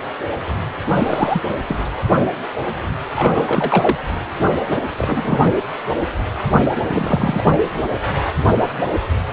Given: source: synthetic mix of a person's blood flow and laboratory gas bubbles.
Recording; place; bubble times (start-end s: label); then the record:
Doppler ultrasound of blood flow; precordium
0.88-1.41 s: bubbles
1.67-1.78 s: bubbles
3.16-3.96 s: bubbles
4.63-4.80 s: bubbles
4.98-5.57 s: bubbles
6.90-7.44 s: bubbles
From the record:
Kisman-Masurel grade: 232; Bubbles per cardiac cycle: several, 3 to 8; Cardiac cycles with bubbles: 50 to 99%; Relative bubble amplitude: moderate (0.250 to 0.450); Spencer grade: 3 (all of the cardiac periods contain showers or single bubble signals, but not dominating or overriding the cardiac motion signals); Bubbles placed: anywhere in the cardiac cycle